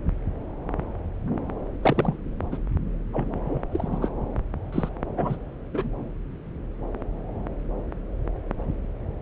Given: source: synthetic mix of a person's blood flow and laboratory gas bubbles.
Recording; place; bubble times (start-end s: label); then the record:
Doppler ultrasound of blood flow; subclavian vein
1.82-2.17 s: bubbles
2.51-2.57 s: bubbles
3.13-3.31 s: bubbles
3.46-3.61 s: bubbles
3.71-3.88 s: bubbles
3.92-3.98 s: bubbles
4.01-4.08 s: bubbles
4.72-4.89 s: bubbles
5.17-5.36 s: bubbles
5.73-5.90 s: bubbles
From the record:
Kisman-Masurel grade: 221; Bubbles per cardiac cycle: several, 3 to 8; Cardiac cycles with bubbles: 10 to 50%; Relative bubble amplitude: barely perceptible (0.100 to 0.250); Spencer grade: 2 (many but less than half of the cardiac periods contain bubble signals, singularly or in groups); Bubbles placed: anywhere in the cardiac cycle